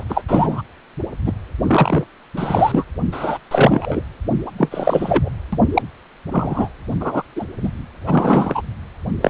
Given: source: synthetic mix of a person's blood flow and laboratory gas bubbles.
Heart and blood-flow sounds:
Doppler ultrasound of blood flow; precordium
0.00-0.03 s: bubbles
0.09-0.22 s: bubbles
0.29-0.61 s: bubbles
1.26-1.32 s: bubbles
1.67-2.04 s: bubbles
2.34-2.84 s: bubbles
3.12-3.38 s: bubbles
3.51-4.02 s: bubbles
4.46-4.51 s: bubbles
4.58-5.29 s: bubbles
5.53-5.58 s: bubbles
5.74-5.83 s: bubbles
6.32-6.69 s: bubbles
7.00-7.23 s: bubbles
7.36-7.46 s: bubbles
7.63-7.68 s: bubbles
8.06-8.62 s: bubbles
9.21-9.30 s: bubbles
From the record:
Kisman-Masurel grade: 243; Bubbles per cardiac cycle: several, 3 to 8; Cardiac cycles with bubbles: 100%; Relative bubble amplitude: loud (0.450 to 0.775); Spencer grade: 3 (all of the cardiac periods contain showers or single bubble signals, but not dominating or overriding the cardiac motion signals); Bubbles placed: anywhere in the cardiac cycle

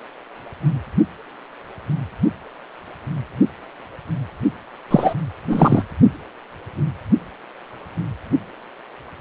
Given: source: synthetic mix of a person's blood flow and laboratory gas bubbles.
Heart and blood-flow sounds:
Doppler ultrasound of blood flow; precordium
4.90-5.13 s: bubbles
5.49-5.83 s: bubbles
From the record:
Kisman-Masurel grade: 213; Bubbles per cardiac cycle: several, 3 to 8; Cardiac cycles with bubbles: 1 to 10%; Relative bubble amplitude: loud (0.450 to 0.775); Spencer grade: 1 (occasional bubble signal discernible with the cardiac motion signal, with majority of cardiac periods free of bubbles); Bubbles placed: only in the low amplitude regions of the cardiac cycle

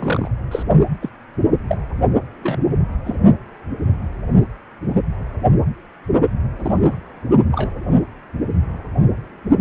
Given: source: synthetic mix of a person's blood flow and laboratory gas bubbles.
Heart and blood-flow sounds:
Doppler ultrasound of blood flow; precordium
0.00-0.29 s: bubbles
0.51-0.63 s: bubbles
1.02-1.09 s: bubbles
1.69-1.77 s: bubbles
2.44-2.60 s: bubbles
3.04-3.15 s: bubbles
6.58-6.95 s: bubbles
7.51-7.70 s: bubbles
From the record:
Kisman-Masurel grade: 122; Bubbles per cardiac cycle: 1 to 2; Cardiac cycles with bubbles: 10 to 50%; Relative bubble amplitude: moderate (0.250 to 0.450); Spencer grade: 2 (many but less than half of the cardiac periods contain bubble signals, singularly or in groups); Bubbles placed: only in the low amplitude regions of the cardiac cycle

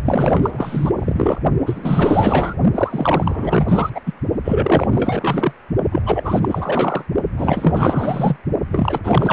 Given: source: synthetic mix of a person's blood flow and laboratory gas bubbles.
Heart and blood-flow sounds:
Doppler ultrasound of blood flow; precordium
0.05-0.92 s: bubbles
0.98-1.40 s: bubbles
1.66-2.54 s: bubbles
2.75-3.90 s: bubbles
3.94-4.01 s: bubbles
4.06-4.13 s: bubbles
4.44-4.87 s: bubbles
4.91-5.53 s: bubbles
5.92-6.02 s: bubbles
6.06-7.04 s: bubbles
7.37-8.37 s: bubbles
8.71-8.98 s: bubbles
9.04-9.33 s: bubbles
From the record:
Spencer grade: 4 (maximum detectable bubble signal sounding continuously throughout systole and diastole of every cardiac period, and overriding the amplitude of the normal cardiac signals); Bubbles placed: only in the low amplitude regions of the cardiac cycle

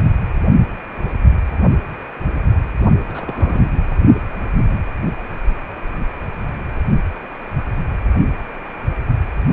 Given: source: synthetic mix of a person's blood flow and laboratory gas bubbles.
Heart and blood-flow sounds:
Doppler ultrasound of blood flow; precordium
3.08-3.82 s: bubbles
3.91-3.95 s: bubbles
From the record:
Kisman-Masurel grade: 211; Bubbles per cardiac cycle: several, 3 to 8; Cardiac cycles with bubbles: 1 to 10%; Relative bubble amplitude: barely perceptible (0.100 to 0.250); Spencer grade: 1 (occasional bubble signal discernible with the cardiac motion signal, with majority of cardiac periods free of bubbles); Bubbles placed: only in the low amplitude regions of the cardiac cycle

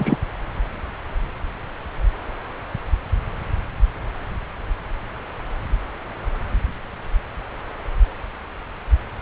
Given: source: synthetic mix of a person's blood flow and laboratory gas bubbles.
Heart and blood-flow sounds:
Doppler ultrasound of blood flow; subclavian vein
0.00-0.17 s: bubbles
From the record:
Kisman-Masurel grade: 123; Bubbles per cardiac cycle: 1 to 2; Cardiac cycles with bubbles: 10 to 50%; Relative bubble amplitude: loud (0.450 to 0.775); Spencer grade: 2 (many but less than half of the cardiac periods contain bubble signals, singularly or in groups); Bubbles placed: anywhere in the cardiac cycle

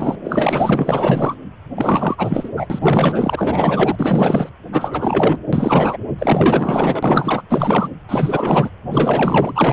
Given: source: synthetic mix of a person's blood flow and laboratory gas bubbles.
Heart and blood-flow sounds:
Doppler ultrasound of blood flow; precordium
0.00-0.15 s: bubbles
0.24-1.34 s: bubbles
1.75-2.49 s: bubbles
2.56-2.67 s: bubbles
2.70-3.96 s: bubbles
3.98-4.50 s: bubbles
4.72-5.42 s: bubbles
5.52-5.97 s: bubbles
6.18-7.42 s: bubbles
7.49-7.90 s: bubbles
8.09-8.70 s: bubbles
8.91-9.73 s: bubbles
From the record:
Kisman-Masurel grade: 444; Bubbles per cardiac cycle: continuous sound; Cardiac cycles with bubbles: 100%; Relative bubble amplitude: maximal (0.775 to 0.999); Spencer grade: 4 (maximum detectable bubble signal sounding continuously throughout systole and diastole of every cardiac period, and overriding the amplitude of the normal cardiac signals); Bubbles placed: anywhere in the cardiac cycle

